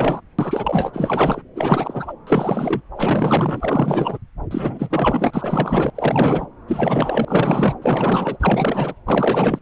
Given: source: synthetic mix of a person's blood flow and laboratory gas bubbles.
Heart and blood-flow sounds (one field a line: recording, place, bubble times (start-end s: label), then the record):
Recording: Doppler ultrasound of blood flow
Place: subclavian vein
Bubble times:
0.00-0.21 s: bubbles
0.39-0.91 s: bubbles
0.93-1.42 s: bubbles
1.55-2.13 s: bubbles
2.26-2.81 s: bubbles
2.96-4.18 s: bubbles
4.50-5.90 s: bubbles
5.95-6.46 s: bubbles
6.67-7.79 s: bubbles
7.82-8.95 s: bubbles
9.05-9.59 s: bubbles
From the record:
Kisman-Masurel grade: 444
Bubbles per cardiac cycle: continuous sound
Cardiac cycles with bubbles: 100%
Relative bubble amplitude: maximal (0.775 to 0.999)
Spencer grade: 4 (maximum detectable bubble signal sounding continuously throughout systole and diastole of every cardiac period, and overriding the amplitude of the normal cardiac signals)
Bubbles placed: anywhere in the cardiac cycle